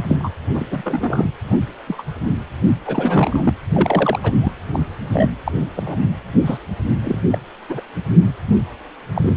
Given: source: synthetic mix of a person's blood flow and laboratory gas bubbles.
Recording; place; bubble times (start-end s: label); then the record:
Doppler ultrasound of blood flow; precordium
0.08-0.16 s: bubbles
0.19-0.31 s: bubbles
0.53-0.67 s: bubbles
0.70-1.29 s: bubbles
1.44-1.58 s: bubbles
1.88-2.02 s: bubbles
2.86-3.54 s: bubbles
3.70-4.20 s: bubbles
4.22-4.32 s: bubbles
4.41-4.53 s: bubbles
4.74-4.79 s: bubbles
5.11-5.30 s: bubbles
5.44-5.52 s: bubbles
5.76-5.83 s: bubbles
5.86-6.08 s: bubbles
6.45-6.59 s: bubbles
7.04-7.18 s: bubbles
7.31-7.38 s: bubbles
7.69-7.80 s: bubbles
9.15-9.35 s: bubbles
From the record:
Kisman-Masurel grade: 242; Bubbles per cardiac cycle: several, 3 to 8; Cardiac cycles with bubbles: 100%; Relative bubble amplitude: moderate (0.250 to 0.450); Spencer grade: 3 (all of the cardiac periods contain showers or single bubble signals, but not dominating or overriding the cardiac motion signals); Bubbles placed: anywhere in the cardiac cycle